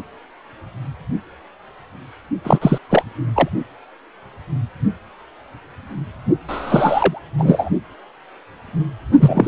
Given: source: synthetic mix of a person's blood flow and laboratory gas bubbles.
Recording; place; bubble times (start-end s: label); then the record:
Doppler ultrasound of blood flow; precordium
2.44-2.78 s: bubbles
2.89-3.03 s: bubbles
3.35-3.49 s: bubbles
6.48-7.21 s: bubbles
7.38-7.70 s: bubbles
9.20-9.48 s: bubbles
From the record:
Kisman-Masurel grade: 223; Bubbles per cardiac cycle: several, 3 to 8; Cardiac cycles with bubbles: 10 to 50%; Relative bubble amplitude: loud (0.450 to 0.775); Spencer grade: 2 (many but less than half of the cardiac periods contain bubble signals, singularly or in groups); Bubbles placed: only in the low amplitude regions of the cardiac cycle